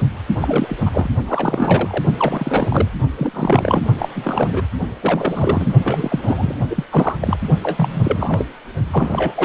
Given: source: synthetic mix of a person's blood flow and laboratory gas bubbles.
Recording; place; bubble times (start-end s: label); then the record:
Doppler ultrasound of blood flow; precordium
0.00-0.02 s: bubbles
0.41-0.78 s: bubbles
0.85-1.08 s: bubbles
1.27-2.04 s: bubbles
2.17-2.88 s: bubbles
3.17-3.83 s: bubbles
3.99-4.09 s: bubbles
4.13-4.62 s: bubbles
5.02-5.72 s: bubbles
5.84-6.55 s: bubbles
6.70-6.84 s: bubbles
6.90-7.17 s: bubbles
7.21-7.37 s: bubbles
7.63-8.46 s: bubbles
8.92-9.45 s: bubbles
From the record:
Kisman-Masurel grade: 332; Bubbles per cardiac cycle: rolling drumbeat, 9 or more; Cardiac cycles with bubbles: 50 to 99%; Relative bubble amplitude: moderate (0.250 to 0.450); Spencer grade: 3 (all of the cardiac periods contain showers or single bubble signals, but not dominating or overriding the cardiac motion signals); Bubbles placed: only in the low amplitude regions of the cardiac cycle